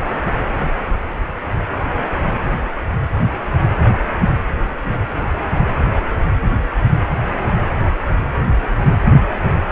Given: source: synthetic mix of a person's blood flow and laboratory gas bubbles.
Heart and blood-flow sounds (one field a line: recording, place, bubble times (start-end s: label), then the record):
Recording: Doppler ultrasound of blood flow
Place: precordium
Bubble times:
0.52-0.78 s: bubbles
From the record:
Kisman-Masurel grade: 111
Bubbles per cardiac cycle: 1 to 2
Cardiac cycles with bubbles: 1 to 10%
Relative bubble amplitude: barely perceptible (0.100 to 0.250)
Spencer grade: 1 (occasional bubble signal discernible with the cardiac motion signal, with majority of cardiac periods free of bubbles)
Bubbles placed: anywhere in the cardiac cycle